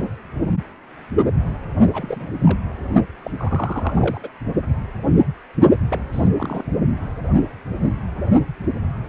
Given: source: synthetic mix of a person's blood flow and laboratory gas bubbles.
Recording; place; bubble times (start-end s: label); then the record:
Doppler ultrasound of blood flow; precordium
1.93-2.29 s: bubbles
2.44-2.59 s: bubbles
3.24-3.30 s: bubbles
3.37-4.30 s: bubbles
5.88-6.09 s: bubbles
6.12-6.28 s: bubbles
6.36-6.64 s: bubbles
From the record:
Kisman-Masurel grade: 221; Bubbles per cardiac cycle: several, 3 to 8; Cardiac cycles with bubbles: 10 to 50%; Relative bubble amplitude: barely perceptible (0.100 to 0.250); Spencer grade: 2 (many but less than half of the cardiac periods contain bubble signals, singularly or in groups); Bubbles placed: only in the low amplitude regions of the cardiac cycle